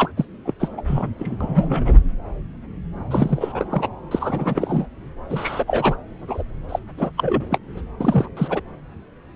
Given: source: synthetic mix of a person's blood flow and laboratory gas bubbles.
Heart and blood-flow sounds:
Doppler ultrasound of blood flow; subclavian vein
0.00-0.11 s: bubbles
0.17-0.26 s: bubbles
0.45-0.53 s: bubbles
0.59-0.68 s: bubbles
0.77-0.81 s: bubbles
0.86-1.08 s: bubbles
1.19-1.37 s: bubbles
1.41-1.97 s: bubbles
3.10-3.88 s: bubbles
4.11-4.88 s: bubbles
5.29-5.64 s: bubbles
5.67-5.96 s: bubbles
6.27-6.43 s: bubbles
6.69-6.79 s: bubbles
6.97-7.11 s: bubbles
7.17-7.44 s: bubbles
7.50-7.58 s: bubbles
7.77-7.81 s: bubbles
7.99-8.29 s: bubbles
8.37-8.61 s: bubbles
From the record:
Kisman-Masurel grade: 332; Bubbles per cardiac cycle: rolling drumbeat, 9 or more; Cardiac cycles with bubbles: 50 to 99%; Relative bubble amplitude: moderate (0.250 to 0.450); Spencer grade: 3 (all of the cardiac periods contain showers or single bubble signals, but not dominating or overriding the cardiac motion signals); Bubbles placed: anywhere in the cardiac cycle

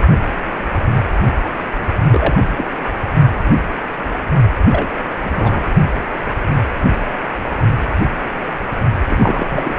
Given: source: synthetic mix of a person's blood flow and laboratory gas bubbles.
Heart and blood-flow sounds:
Doppler ultrasound of blood flow; precordium
1.81-1.88 s: bubbles
2.11-2.41 s: bubbles
2.57-2.65 s: bubbles
4.71-4.87 s: bubbles
5.25-5.29 s: bubbles
5.35-5.71 s: bubbles
9.07-9.46 s: bubbles
9.48-9.73 s: bubbles
From the record:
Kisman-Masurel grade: 222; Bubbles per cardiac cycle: several, 3 to 8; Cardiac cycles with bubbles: 10 to 50%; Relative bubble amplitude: moderate (0.250 to 0.450); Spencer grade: 2 (many but less than half of the cardiac periods contain bubble signals, singularly or in groups); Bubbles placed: only in the low amplitude regions of the cardiac cycle

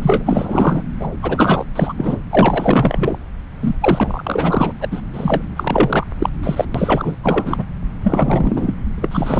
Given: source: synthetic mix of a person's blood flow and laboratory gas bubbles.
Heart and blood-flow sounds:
Doppler ultrasound of blood flow; subclavian vein
0.01-0.82 s: bubbles
0.99-1.06 s: bubbles
1.22-1.65 s: bubbles
1.75-1.94 s: bubbles
1.96-2.19 s: bubbles
2.29-3.17 s: bubbles
3.60-3.75 s: bubbles
3.80-4.73 s: bubbles
4.81-4.89 s: bubbles
4.91-5.01 s: bubbles
5.14-5.42 s: bubbles
5.56-6.07 s: bubbles
6.19-6.29 s: bubbles
6.43-6.65 s: bubbles
6.75-7.16 s: bubbles
7.23-7.64 s: bubbles
8.03-8.74 s: bubbles
8.97-9.40 s: bubbles
From the record:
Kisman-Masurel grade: 444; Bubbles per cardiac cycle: continuous sound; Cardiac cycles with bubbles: 100%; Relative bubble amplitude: maximal (0.775 to 0.999); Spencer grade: 4 (maximum detectable bubble signal sounding continuously throughout systole and diastole of every cardiac period, and overriding the amplitude of the normal cardiac signals); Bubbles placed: anywhere in the cardiac cycle

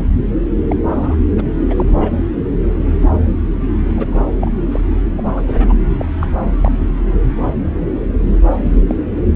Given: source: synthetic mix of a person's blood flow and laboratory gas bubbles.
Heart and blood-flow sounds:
Doppler ultrasound of blood flow; subclavian vein
0.68-0.76 s: bubbles
0.86-1.16 s: bubbles
1.36-1.44 s: bubbles
1.70-1.86 s: bubbles
1.97-2.11 s: bubbles
3.90-4.17 s: bubbles
4.41-4.50 s: bubbles
4.71-4.81 s: bubbles
5.17-5.32 s: bubbles
5.37-5.44 s: bubbles
5.47-5.73 s: bubbles
5.98-6.06 s: bubbles
6.21-6.27 s: bubbles
6.58-6.71 s: bubbles
8.33-8.38 s: bubbles
8.64-8.84 s: bubbles
8.87-8.96 s: bubbles
From the record:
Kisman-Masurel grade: 232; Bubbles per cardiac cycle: several, 3 to 8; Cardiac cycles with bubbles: 50 to 99%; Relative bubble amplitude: moderate (0.250 to 0.450); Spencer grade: 3 (all of the cardiac periods contain showers or single bubble signals, but not dominating or overriding the cardiac motion signals); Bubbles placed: anywhere in the cardiac cycle

